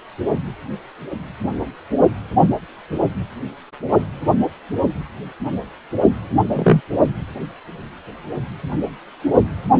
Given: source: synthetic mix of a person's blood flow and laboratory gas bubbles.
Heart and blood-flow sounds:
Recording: Doppler ultrasound of blood flow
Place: precordium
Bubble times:
6.54-6.81 s: bubbles
From the record:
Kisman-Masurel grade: 113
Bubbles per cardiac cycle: 1 to 2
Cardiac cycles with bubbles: 1 to 10%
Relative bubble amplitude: loud (0.450 to 0.775)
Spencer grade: 1 (occasional bubble signal discernible with the cardiac motion signal, with majority of cardiac periods free of bubbles)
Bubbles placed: only in the low amplitude regions of the cardiac cycle

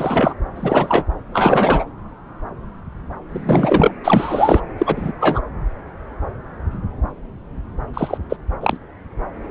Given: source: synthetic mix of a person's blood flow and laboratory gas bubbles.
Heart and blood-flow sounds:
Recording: Doppler ultrasound of blood flow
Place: subclavian vein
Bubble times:
0.00-0.34 s: bubbles
0.55-1.04 s: bubbles
1.33-1.85 s: bubbles
3.29-3.92 s: bubbles
4.04-4.60 s: bubbles
4.78-5.12 s: bubbles
5.20-5.41 s: bubbles
7.93-8.18 s: bubbles
8.29-8.37 s: bubbles
8.61-8.77 s: bubbles
From the record:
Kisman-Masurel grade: 233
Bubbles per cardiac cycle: several, 3 to 8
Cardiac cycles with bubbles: 50 to 99%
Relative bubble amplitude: loud (0.450 to 0.775)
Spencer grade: 3 (all of the cardiac periods contain showers or single bubble signals, but not dominating or overriding the cardiac motion signals)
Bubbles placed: anywhere in the cardiac cycle

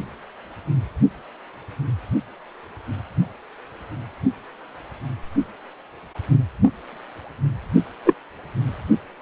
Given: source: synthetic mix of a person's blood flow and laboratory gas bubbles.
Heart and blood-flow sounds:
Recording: Doppler ultrasound of blood flow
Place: precordium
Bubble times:
8.04-8.13 s: bubbles
From the record:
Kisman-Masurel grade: 113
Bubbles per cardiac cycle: 1 to 2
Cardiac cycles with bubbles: 1 to 10%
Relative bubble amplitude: loud (0.450 to 0.775)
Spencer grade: 1 (occasional bubble signal discernible with the cardiac motion signal, with majority of cardiac periods free of bubbles)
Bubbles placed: only in the low amplitude regions of the cardiac cycle

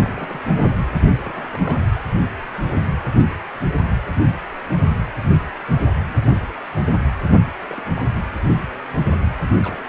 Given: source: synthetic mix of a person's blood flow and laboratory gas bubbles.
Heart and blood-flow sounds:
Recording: Doppler ultrasound of blood flow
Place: precordium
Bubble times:
0.00-0.44 s: bubbles
0.57-0.86 s: bubbles
0.98-1.08 s: bubbles
1.22-2.05 s: bubbles
7.33-7.39 s: bubbles
7.59-7.83 s: bubbles
7.96-8.06 s: bubbles
8.10-8.13 s: bubbles
9.63-9.89 s: bubbles
From the record:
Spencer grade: 2 (many but less than half of the cardiac periods contain bubble signals, singularly or in groups)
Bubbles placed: anywhere in the cardiac cycle

